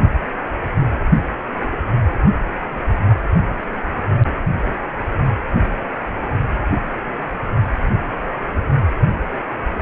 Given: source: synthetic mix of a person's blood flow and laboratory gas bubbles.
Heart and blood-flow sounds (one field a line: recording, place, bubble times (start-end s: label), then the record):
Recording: Doppler ultrasound of blood flow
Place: precordium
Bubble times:
8.87-9.01 s: bubbles
From the record:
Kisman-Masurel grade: 121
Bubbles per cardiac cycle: 1 to 2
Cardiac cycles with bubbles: 10 to 50%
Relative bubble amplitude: barely perceptible (0.100 to 0.250)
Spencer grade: 2 (many but less than half of the cardiac periods contain bubble signals, singularly or in groups)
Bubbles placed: only in the low amplitude regions of the cardiac cycle